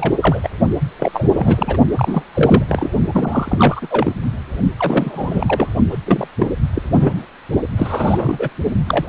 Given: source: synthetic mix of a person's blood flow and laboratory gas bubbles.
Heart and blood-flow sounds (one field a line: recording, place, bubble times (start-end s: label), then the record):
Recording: Doppler ultrasound of blood flow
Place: precordium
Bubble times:
0.00-0.14 s: bubbles
0.21-0.49 s: bubbles
0.99-1.27 s: bubbles
1.35-1.77 s: bubbles
1.90-2.24 s: bubbles
2.34-2.63 s: bubbles
2.69-2.89 s: bubbles
3.12-3.88 s: bubbles
3.90-4.13 s: bubbles
4.78-5.70 s: bubbles
5.91-5.97 s: bubbles
6.06-6.28 s: bubbles
6.39-6.47 s: bubbles
6.74-6.82 s: bubbles
6.92-7.27 s: bubbles
7.77-8.49 s: bubbles
8.87-9.09 s: bubbles
From the record:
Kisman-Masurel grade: 343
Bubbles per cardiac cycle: rolling drumbeat, 9 or more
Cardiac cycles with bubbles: 100%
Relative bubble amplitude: loud (0.450 to 0.775)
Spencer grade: 3 (all of the cardiac periods contain showers or single bubble signals, but not dominating or overriding the cardiac motion signals)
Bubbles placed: only in the low amplitude regions of the cardiac cycle